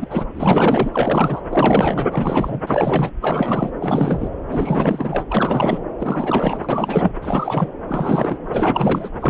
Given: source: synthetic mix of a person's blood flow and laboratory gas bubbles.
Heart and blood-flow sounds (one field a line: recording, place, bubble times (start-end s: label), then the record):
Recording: Doppler ultrasound of blood flow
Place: subclavian vein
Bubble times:
0.00-0.27 s: bubbles
0.35-1.42 s: bubbles
1.50-2.08 s: bubbles
2.11-2.60 s: bubbles
2.67-3.11 s: bubbles
3.21-3.71 s: bubbles
3.79-4.30 s: bubbles
4.49-5.24 s: bubbles
5.29-5.83 s: bubbles
5.99-7.13 s: bubbles
7.21-7.69 s: bubbles
7.88-8.39 s: bubbles
8.52-9.10 s: bubbles
9.20-9.30 s: bubbles
From the record:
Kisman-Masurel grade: 444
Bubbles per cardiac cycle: continuous sound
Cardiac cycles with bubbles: 100%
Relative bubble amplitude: maximal (0.775 to 0.999)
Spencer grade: 4 (maximum detectable bubble signal sounding continuously throughout systole and diastole of every cardiac period, and overriding the amplitude of the normal cardiac signals)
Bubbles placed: anywhere in the cardiac cycle